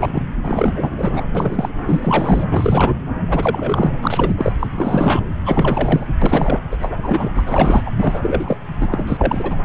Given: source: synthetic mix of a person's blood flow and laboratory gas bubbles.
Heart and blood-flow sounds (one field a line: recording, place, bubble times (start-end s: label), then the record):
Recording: Doppler ultrasound of blood flow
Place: subclavian vein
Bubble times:
0.00-0.23 s: bubbles
0.44-0.92 s: bubbles
0.97-1.22 s: bubbles
1.35-1.69 s: bubbles
1.87-2.46 s: bubbles
2.51-2.94 s: bubbles
3.29-3.96 s: bubbles
4.01-4.34 s: bubbles
4.38-4.52 s: bubbles
4.59-4.67 s: bubbles
4.75-5.22 s: bubbles
5.46-6.13 s: bubbles
6.21-6.61 s: bubbles
6.71-6.77 s: bubbles
6.79-6.97 s: bubbles
7.03-7.42 s: bubbles
7.46-7.90 s: bubbles
7.98-8.57 s: bubbles
8.81-8.87 s: bubbles
8.91-9.58 s: bubbles
From the record:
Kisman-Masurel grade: 342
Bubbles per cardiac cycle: rolling drumbeat, 9 or more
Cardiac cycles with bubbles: 100%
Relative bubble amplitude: moderate (0.250 to 0.450)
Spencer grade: 3 (all of the cardiac periods contain showers or single bubble signals, but not dominating or overriding the cardiac motion signals)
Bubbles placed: anywhere in the cardiac cycle